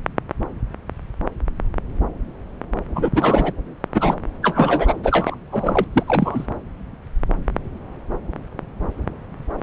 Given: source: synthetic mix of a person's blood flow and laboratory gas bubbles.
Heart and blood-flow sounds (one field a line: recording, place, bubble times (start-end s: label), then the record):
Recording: Doppler ultrasound of blood flow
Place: subclavian vein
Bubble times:
2.95-3.09 s: bubbles
3.13-3.53 s: bubbles
3.94-4.17 s: bubbles
4.42-5.00 s: bubbles
5.03-5.36 s: bubbles
5.52-5.85 s: bubbles
5.92-6.03 s: bubbles
6.07-6.46 s: bubbles
From the record:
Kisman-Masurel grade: 223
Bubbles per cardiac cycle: several, 3 to 8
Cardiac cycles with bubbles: 10 to 50%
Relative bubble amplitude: loud (0.450 to 0.775)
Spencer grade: 2 (many but less than half of the cardiac periods contain bubble signals, singularly or in groups)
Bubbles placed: anywhere in the cardiac cycle